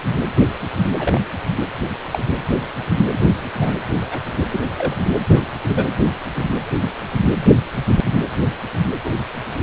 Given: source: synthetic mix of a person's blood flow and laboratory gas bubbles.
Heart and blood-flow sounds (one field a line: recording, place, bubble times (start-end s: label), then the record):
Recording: Doppler ultrasound of blood flow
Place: precordium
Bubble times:
0.98-1.19 s: bubbles
2.11-2.20 s: bubbles
3.60-3.73 s: bubbles
4.00-4.20 s: bubbles
4.51-4.59 s: bubbles
4.78-4.95 s: bubbles
5.31-5.45 s: bubbles
5.62-5.89 s: bubbles
5.96-6.04 s: bubbles
6.32-6.45 s: bubbles
9.04-9.11 s: bubbles
From the record:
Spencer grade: 2 (many but less than half of the cardiac periods contain bubble signals, singularly or in groups)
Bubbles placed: anywhere in the cardiac cycle